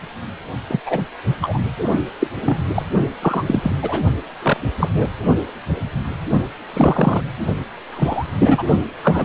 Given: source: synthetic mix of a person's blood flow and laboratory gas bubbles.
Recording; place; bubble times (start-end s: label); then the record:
Doppler ultrasound of blood flow; precordium
0.68-0.80 s: bubbles
0.85-1.01 s: bubbles
1.41-1.60 s: bubbles
1.90-2.02 s: bubbles
2.19-2.29 s: bubbles
2.42-2.58 s: bubbles
2.75-2.82 s: bubbles
3.21-3.44 s: bubbles
3.46-3.76 s: bubbles
3.82-4.01 s: bubbles
4.43-4.60 s: bubbles
4.79-4.89 s: bubbles
4.94-5.08 s: bubbles
6.74-7.22 s: bubbles
7.92-8.26 s: bubbles
8.38-8.63 s: bubbles
9.03-9.25 s: bubbles
From the record:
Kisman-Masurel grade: 233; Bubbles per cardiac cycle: several, 3 to 8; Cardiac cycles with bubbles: 50 to 99%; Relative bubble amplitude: loud (0.450 to 0.775); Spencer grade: 3 (all of the cardiac periods contain showers or single bubble signals, but not dominating or overriding the cardiac motion signals); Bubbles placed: only in the low amplitude regions of the cardiac cycle